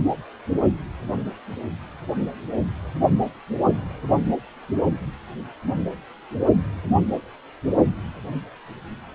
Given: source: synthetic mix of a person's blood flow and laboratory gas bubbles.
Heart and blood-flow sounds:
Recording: Doppler ultrasound of blood flow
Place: precordium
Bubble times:
no bubbles
From the record:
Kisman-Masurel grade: 000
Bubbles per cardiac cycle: 0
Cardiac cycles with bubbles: 0%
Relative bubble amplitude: no bubbles discernible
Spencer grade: 0 (complete lack of bubble signals)

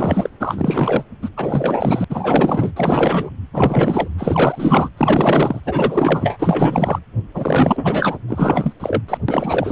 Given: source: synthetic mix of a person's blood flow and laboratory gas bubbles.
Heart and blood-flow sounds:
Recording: Doppler ultrasound of blood flow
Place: precordium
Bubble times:
0.00-0.29 s: bubbles
0.39-1.03 s: bubbles
1.22-1.29 s: bubbles
1.36-2.05 s: bubbles
2.10-2.73 s: bubbles
2.76-3.31 s: bubbles
3.53-4.08 s: bubbles
4.18-4.90 s: bubbles
4.97-5.61 s: bubbles
5.66-6.99 s: bubbles
7.33-8.18 s: bubbles
8.27-8.73 s: bubbles
8.79-9.02 s: bubbles
9.08-9.18 s: bubbles
9.28-9.72 s: bubbles
From the record:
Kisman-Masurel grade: 444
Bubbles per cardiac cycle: continuous sound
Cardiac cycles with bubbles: 100%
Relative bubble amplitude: maximal (0.775 to 0.999)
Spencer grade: 4 (maximum detectable bubble signal sounding continuously throughout systole and diastole of every cardiac period, and overriding the amplitude of the normal cardiac signals)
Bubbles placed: anywhere in the cardiac cycle

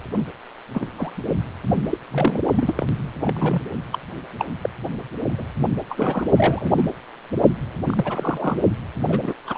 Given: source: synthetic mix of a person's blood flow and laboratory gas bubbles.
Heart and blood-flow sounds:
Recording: Doppler ultrasound of blood flow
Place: precordium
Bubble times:
0.15-0.23 s: bubbles
0.73-0.87 s: bubbles
0.97-1.16 s: bubbles
1.90-1.98 s: bubbles
2.10-2.42 s: bubbles
2.56-2.73 s: bubbles
2.77-2.86 s: bubbles
3.21-3.60 s: bubbles
3.92-3.98 s: bubbles
4.38-4.45 s: bubbles
4.62-4.70 s: bubbles
5.38-5.46 s: bubbles
5.89-6.26 s: bubbles
6.38-6.72 s: bubbles
6.75-6.85 s: bubbles
7.85-8.60 s: bubbles
9.08-9.33 s: bubbles
9.46-9.58 s: bubbles
From the record:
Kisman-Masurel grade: 242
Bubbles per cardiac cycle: several, 3 to 8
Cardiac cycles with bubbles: 100%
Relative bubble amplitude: moderate (0.250 to 0.450)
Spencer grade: 3 (all of the cardiac periods contain showers or single bubble signals, but not dominating or overriding the cardiac motion signals)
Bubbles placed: only in the low amplitude regions of the cardiac cycle

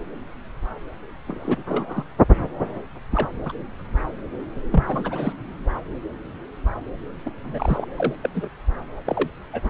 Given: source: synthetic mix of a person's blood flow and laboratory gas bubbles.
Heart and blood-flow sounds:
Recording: Doppler ultrasound of blood flow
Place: subclavian vein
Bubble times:
1.27-1.63 s: bubbles
1.69-2.04 s: bubbles
3.10-3.29 s: bubbles
3.45-3.52 s: bubbles
4.71-4.84 s: bubbles
4.88-5.33 s: bubbles
7.25-7.30 s: bubbles
7.43-7.86 s: bubbles
7.96-8.15 s: bubbles
8.22-8.30 s: bubbles
8.34-8.48 s: bubbles
9.05-9.30 s: bubbles
9.53-9.61 s: bubbles
9.64-9.70 s: bubbles
From the record:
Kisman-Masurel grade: 232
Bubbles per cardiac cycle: several, 3 to 8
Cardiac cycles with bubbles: 50 to 99%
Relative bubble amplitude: moderate (0.250 to 0.450)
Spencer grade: 3 (all of the cardiac periods contain showers or single bubble signals, but not dominating or overriding the cardiac motion signals)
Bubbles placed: anywhere in the cardiac cycle

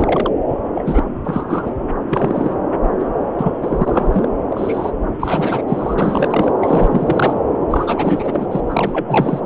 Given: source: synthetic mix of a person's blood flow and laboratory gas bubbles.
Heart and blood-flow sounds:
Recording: Doppler ultrasound of blood flow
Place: subclavian vein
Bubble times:
0.00-0.31 s: bubbles
0.75-1.04 s: bubbles
1.24-1.73 s: bubbles
2.08-2.56 s: bubbles
2.99-3.09 s: bubbles
3.38-3.52 s: bubbles
3.61-4.10 s: bubbles
4.12-4.29 s: bubbles
4.50-4.92 s: bubbles
5.20-5.64 s: bubbles
5.67-5.95 s: bubbles
5.98-6.52 s: bubbles
6.61-7.41 s: bubbles
7.70-8.47 s: bubbles
8.51-8.61 s: bubbles
8.67-9.40 s: bubbles
From the record:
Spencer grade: 3 (all of the cardiac periods contain showers or single bubble signals, but not dominating or overriding the cardiac motion signals)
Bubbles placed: anywhere in the cardiac cycle

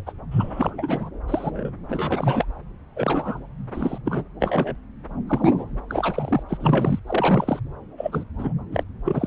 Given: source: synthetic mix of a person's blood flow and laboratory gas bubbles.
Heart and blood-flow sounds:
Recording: Doppler ultrasound of blood flow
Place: subclavian vein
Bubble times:
0.06-0.12 s: bubbles
0.31-1.10 s: bubbles
1.27-1.71 s: bubbles
1.88-2.46 s: bubbles
2.96-3.40 s: bubbles
3.73-3.98 s: bubbles
4.05-4.24 s: bubbles
4.40-4.76 s: bubbles
5.27-5.65 s: bubbles
5.89-6.43 s: bubbles
6.49-6.58 s: bubbles
6.60-7.00 s: bubbles
7.07-7.61 s: bubbles
7.97-8.25 s: bubbles
8.38-8.53 s: bubbles
8.72-8.84 s: bubbles
9.04-9.27 s: bubbles
From the record:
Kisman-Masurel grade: 243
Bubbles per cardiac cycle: several, 3 to 8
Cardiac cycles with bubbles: 100%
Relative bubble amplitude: loud (0.450 to 0.775)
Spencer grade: 3 (all of the cardiac periods contain showers or single bubble signals, but not dominating or overriding the cardiac motion signals)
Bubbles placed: anywhere in the cardiac cycle

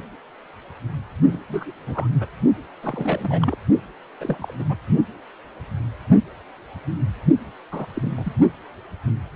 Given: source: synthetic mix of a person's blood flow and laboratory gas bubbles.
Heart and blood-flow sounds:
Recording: Doppler ultrasound of blood flow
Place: precordium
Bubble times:
1.32-1.42 s: bubbles
1.48-1.72 s: bubbles
1.87-2.08 s: bubbles
2.20-2.26 s: bubbles
2.83-3.56 s: bubbles
4.20-4.53 s: bubbles
4.59-4.64 s: bubbles
4.69-4.75 s: bubbles
7.71-7.86 s: bubbles
7.94-8.37 s: bubbles
From the record:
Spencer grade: 2 (many but less than half of the cardiac periods contain bubble signals, singularly or in groups)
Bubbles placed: only in the low amplitude regions of the cardiac cycle

